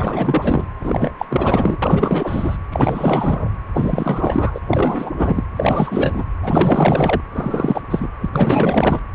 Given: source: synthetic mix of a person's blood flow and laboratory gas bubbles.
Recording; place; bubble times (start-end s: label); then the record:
Doppler ultrasound of blood flow; precordium
0.00-0.65 s: bubbles
0.81-1.12 s: bubbles
1.19-1.25 s: bubbles
1.29-1.77 s: bubbles
1.82-2.57 s: bubbles
2.72-3.50 s: bubbles
3.74-4.60 s: bubbles
4.69-5.12 s: bubbles
5.17-5.44 s: bubbles
5.56-6.25 s: bubbles
6.43-7.21 s: bubbles
7.32-7.81 s: bubbles
7.90-8.08 s: bubbles
8.21-8.29 s: bubbles
8.33-9.01 s: bubbles
From the record:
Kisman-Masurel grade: 444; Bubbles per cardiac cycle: continuous sound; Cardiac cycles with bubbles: 100%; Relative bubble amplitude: maximal (0.775 to 0.999); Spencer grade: 4 (maximum detectable bubble signal sounding continuously throughout systole and diastole of every cardiac period, and overriding the amplitude of the normal cardiac signals); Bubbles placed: anywhere in the cardiac cycle